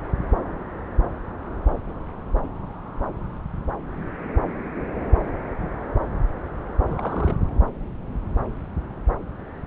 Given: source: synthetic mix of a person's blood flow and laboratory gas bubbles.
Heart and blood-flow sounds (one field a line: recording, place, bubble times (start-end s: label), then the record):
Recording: Doppler ultrasound of blood flow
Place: subclavian vein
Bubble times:
6.86-7.35 s: bubbles
From the record:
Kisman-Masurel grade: 211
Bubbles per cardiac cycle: several, 3 to 8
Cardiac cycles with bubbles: 1 to 10%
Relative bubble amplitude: barely perceptible (0.100 to 0.250)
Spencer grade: 1 (occasional bubble signal discernible with the cardiac motion signal, with majority of cardiac periods free of bubbles)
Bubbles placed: anywhere in the cardiac cycle